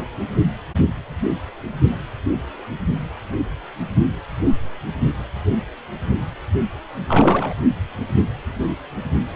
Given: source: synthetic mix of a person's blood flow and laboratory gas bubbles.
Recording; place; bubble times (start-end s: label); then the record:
Doppler ultrasound of blood flow; precordium
7.08-7.53 s: bubbles
From the record:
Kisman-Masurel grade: 222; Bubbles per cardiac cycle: several, 3 to 8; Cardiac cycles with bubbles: 10 to 50%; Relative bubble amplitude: moderate (0.250 to 0.450); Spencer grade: 2 (many but less than half of the cardiac periods contain bubble signals, singularly or in groups); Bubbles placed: only in the low amplitude regions of the cardiac cycle